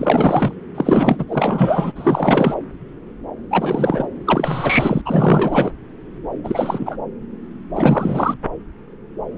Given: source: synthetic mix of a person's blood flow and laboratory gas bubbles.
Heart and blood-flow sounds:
Doppler ultrasound of blood flow; subclavian vein
0.00-0.55 s: bubbles
0.74-1.25 s: bubbles
1.28-1.92 s: bubbles
1.95-2.54 s: bubbles
3.50-4.08 s: bubbles
4.26-5.01 s: bubbles
5.05-5.71 s: bubbles
6.44-6.97 s: bubbles
7.75-8.36 s: bubbles
From the record:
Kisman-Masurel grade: 333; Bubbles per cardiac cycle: rolling drumbeat, 9 or more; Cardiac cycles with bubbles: 50 to 99%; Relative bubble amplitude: loud (0.450 to 0.775); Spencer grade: 3 (all of the cardiac periods contain showers or single bubble signals, but not dominating or overriding the cardiac motion signals); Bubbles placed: anywhere in the cardiac cycle

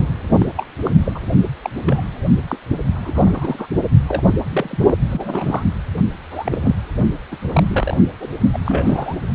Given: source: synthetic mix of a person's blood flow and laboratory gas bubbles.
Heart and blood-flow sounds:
Doppler ultrasound of blood flow; precordium
0.38-0.52 s: bubbles
0.57-0.67 s: bubbles
0.84-0.91 s: bubbles
1.05-1.21 s: bubbles
1.62-1.70 s: bubbles
1.85-2.01 s: bubbles
2.48-2.57 s: bubbles
2.94-3.66 s: bubbles
4.08-4.23 s: bubbles
4.49-4.96 s: bubbles
5.11-5.63 s: bubbles
6.30-6.76 s: bubbles
7.31-7.37 s: bubbles
7.46-7.97 s: bubbles
8.20-8.28 s: bubbles
8.53-8.58 s: bubbles
8.64-9.18 s: bubbles
From the record:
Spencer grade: 3 (all of the cardiac periods contain showers or single bubble signals, but not dominating or overriding the cardiac motion signals); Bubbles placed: only in the low amplitude regions of the cardiac cycle

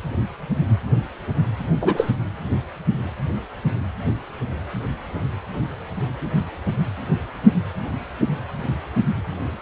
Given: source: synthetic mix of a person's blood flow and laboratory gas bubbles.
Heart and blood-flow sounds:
Doppler ultrasound of blood flow; precordium
1.81-2.11 s: bubbles
From the record:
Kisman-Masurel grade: 113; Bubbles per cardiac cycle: 1 to 2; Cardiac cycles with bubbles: 1 to 10%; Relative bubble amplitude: loud (0.450 to 0.775); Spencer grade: 1 (occasional bubble signal discernible with the cardiac motion signal, with majority of cardiac periods free of bubbles); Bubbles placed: anywhere in the cardiac cycle

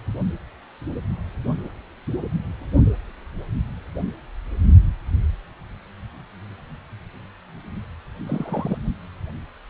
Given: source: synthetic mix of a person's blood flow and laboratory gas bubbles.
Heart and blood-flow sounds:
Doppler ultrasound of blood flow; precordium
8.26-8.78 s: bubbles
From the record:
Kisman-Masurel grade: 121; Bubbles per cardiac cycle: 1 to 2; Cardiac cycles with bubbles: 10 to 50%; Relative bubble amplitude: barely perceptible (0.100 to 0.250); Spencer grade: 2 (many but less than half of the cardiac periods contain bubble signals, singularly or in groups); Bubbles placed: only in the low amplitude regions of the cardiac cycle

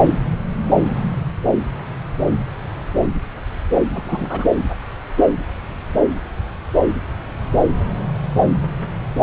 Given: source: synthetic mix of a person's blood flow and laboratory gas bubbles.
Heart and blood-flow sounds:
Doppler ultrasound of blood flow; subclavian vein
3.94-4.49 s: bubbles
From the record:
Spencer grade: 1 (occasional bubble signal discernible with the cardiac motion signal, with majority of cardiac periods free of bubbles); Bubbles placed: anywhere in the cardiac cycle

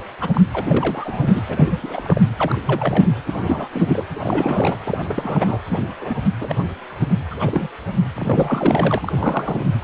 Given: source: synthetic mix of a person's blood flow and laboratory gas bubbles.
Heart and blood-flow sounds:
Doppler ultrasound of blood flow; precordium
0.21-0.29 s: bubbles
0.33-0.41 s: bubbles
0.53-0.61 s: bubbles
0.66-1.41 s: bubbles
1.48-2.21 s: bubbles
2.37-2.60 s: bubbles
2.66-3.08 s: bubbles
3.27-3.68 s: bubbles
3.74-4.05 s: bubbles
4.13-4.76 s: bubbles
4.85-5.59 s: bubbles
5.69-5.84 s: bubbles
6.01-6.18 s: bubbles
6.40-6.54 s: bubbles
6.58-6.64 s: bubbles
7.30-7.68 s: bubbles
8.16-9.12 s: bubbles
9.17-9.65 s: bubbles
9.82-9.84 s: bubbles
From the record:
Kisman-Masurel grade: 242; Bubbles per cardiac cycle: several, 3 to 8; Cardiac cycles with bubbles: 100%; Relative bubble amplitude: moderate (0.250 to 0.450); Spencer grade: 3 (all of the cardiac periods contain showers or single bubble signals, but not dominating or overriding the cardiac motion signals); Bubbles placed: anywhere in the cardiac cycle

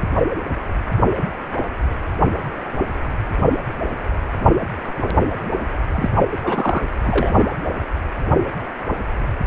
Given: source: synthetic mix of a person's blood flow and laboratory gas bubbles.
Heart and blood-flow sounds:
Doppler ultrasound of blood flow; precordium
5.95-6.11 s: bubbles
6.43-6.86 s: bubbles
7.03-7.38 s: bubbles
From the record:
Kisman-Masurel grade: 212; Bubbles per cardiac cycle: several, 3 to 8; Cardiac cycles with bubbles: 1 to 10%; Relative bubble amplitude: moderate (0.250 to 0.450); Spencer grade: 1 (occasional bubble signal discernible with the cardiac motion signal, with majority of cardiac periods free of bubbles); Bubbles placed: anywhere in the cardiac cycle

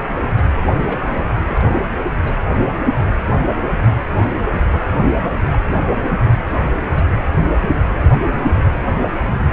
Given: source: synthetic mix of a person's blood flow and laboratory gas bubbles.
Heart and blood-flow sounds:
Doppler ultrasound of blood flow; precordium
0.36-0.42 s: bubbles
0.86-1.30 s: bubbles
1.47-1.64 s: bubbles
2.24-2.33 s: bubbles
5.52-5.59 s: bubbles
6.95-7.04 s: bubbles
7.60-7.70 s: bubbles
From the record:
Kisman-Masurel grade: 121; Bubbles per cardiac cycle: 1 to 2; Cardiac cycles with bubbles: 10 to 50%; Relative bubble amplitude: barely perceptible (0.100 to 0.250); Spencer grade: 2 (many but less than half of the cardiac periods contain bubble signals, singularly or in groups); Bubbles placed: anywhere in the cardiac cycle

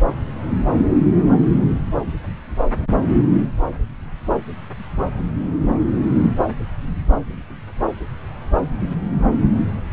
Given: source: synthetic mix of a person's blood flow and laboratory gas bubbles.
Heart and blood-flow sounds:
Doppler ultrasound of blood flow; subclavian vein
no bubbles
From the record:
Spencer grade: 0 (complete lack of bubble signals)

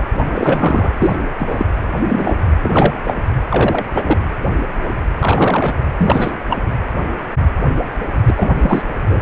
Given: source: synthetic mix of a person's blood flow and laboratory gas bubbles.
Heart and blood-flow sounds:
Doppler ultrasound of blood flow; precordium
0.34-0.90 s: bubbles
0.97-1.16 s: bubbles
1.39-1.66 s: bubbles
2.08-2.39 s: bubbles
2.62-3.15 s: bubbles
3.49-3.85 s: bubbles
3.94-4.20 s: bubbles
5.19-5.74 s: bubbles
5.99-6.40 s: bubbles
6.50-6.58 s: bubbles
8.27-8.51 s: bubbles
8.61-8.82 s: bubbles
9.08-9.21 s: bubbles
From the record:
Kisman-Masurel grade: 233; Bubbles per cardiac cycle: several, 3 to 8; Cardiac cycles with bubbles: 50 to 99%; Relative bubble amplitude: loud (0.450 to 0.775); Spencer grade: 3 (all of the cardiac periods contain showers or single bubble signals, but not dominating or overriding the cardiac motion signals); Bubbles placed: anywhere in the cardiac cycle

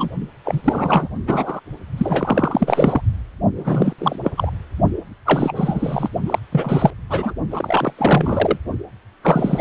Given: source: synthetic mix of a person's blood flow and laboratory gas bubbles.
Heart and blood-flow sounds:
Doppler ultrasound of blood flow; precordium
0.00-0.11 s: bubbles
0.44-0.61 s: bubbles
0.64-1.08 s: bubbles
1.27-1.60 s: bubbles
1.98-3.01 s: bubbles
3.55-3.96 s: bubbles
3.98-4.17 s: bubbles
4.24-4.31 s: bubbles
4.37-4.50 s: bubbles
5.25-6.09 s: bubbles
6.26-6.39 s: bubbles
6.52-6.91 s: bubbles
7.09-7.34 s: bubbles
7.50-7.93 s: bubbles
7.98-8.58 s: bubbles
9.23-9.61 s: bubbles
From the record:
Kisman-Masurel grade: 343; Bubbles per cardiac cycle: rolling drumbeat, 9 or more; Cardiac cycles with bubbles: 100%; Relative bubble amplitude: loud (0.450 to 0.775); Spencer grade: 3 (all of the cardiac periods contain showers or single bubble signals, but not dominating or overriding the cardiac motion signals); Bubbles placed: only in the low amplitude regions of the cardiac cycle

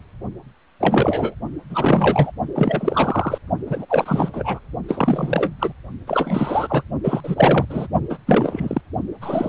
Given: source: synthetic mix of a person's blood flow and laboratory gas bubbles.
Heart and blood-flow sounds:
Doppler ultrasound of blood flow; precordium
0.79-1.35 s: bubbles
1.70-2.32 s: bubbles
2.55-3.38 s: bubbles
3.66-3.86 s: bubbles
3.89-4.60 s: bubbles
4.88-5.52 s: bubbles
5.59-5.73 s: bubbles
6.07-6.83 s: bubbles
7.03-7.66 s: bubbles
7.69-7.87 s: bubbles
8.09-8.18 s: bubbles
8.26-8.81 s: bubbles
9.21-9.49 s: bubbles
From the record:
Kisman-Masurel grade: 343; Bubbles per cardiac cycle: rolling drumbeat, 9 or more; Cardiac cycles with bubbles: 100%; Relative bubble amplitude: loud (0.450 to 0.775); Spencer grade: 3 (all of the cardiac periods contain showers or single bubble signals, but not dominating or overriding the cardiac motion signals); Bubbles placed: only in the low amplitude regions of the cardiac cycle

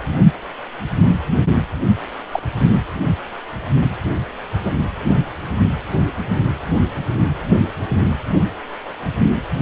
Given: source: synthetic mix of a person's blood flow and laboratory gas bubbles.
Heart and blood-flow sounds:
Doppler ultrasound of blood flow; precordium
2.32-2.39 s: bubbles
4.63-4.72 s: bubbles
From the record:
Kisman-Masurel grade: 122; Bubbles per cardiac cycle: 1 to 2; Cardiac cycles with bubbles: 10 to 50%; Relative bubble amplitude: moderate (0.250 to 0.450); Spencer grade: 2 (many but less than half of the cardiac periods contain bubble signals, singularly or in groups); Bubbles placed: only in the low amplitude regions of the cardiac cycle

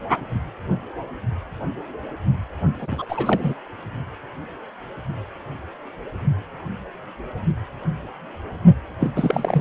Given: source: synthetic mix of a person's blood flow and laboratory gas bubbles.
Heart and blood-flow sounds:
Doppler ultrasound of blood flow; precordium
2.77-3.06 s: bubbles
3.08-3.54 s: bubbles
9.00-9.11 s: bubbles
9.15-9.61 s: bubbles
From the record:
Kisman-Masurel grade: 222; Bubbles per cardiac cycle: several, 3 to 8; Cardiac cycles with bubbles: 10 to 50%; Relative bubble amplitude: moderate (0.250 to 0.450); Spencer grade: 2 (many but less than half of the cardiac periods contain bubble signals, singularly or in groups); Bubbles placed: only in the low amplitude regions of the cardiac cycle

